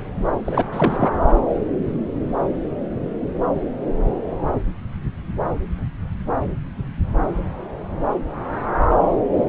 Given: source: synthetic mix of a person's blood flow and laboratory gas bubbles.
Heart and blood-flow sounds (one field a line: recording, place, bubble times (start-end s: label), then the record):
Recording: Doppler ultrasound of blood flow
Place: subclavian vein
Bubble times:
0.45-0.65 s: bubbles
0.72-1.11 s: bubbles
From the record:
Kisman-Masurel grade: 212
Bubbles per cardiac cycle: several, 3 to 8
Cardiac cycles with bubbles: 1 to 10%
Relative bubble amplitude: moderate (0.250 to 0.450)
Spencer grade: 1 (occasional bubble signal discernible with the cardiac motion signal, with majority of cardiac periods free of bubbles)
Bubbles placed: anywhere in the cardiac cycle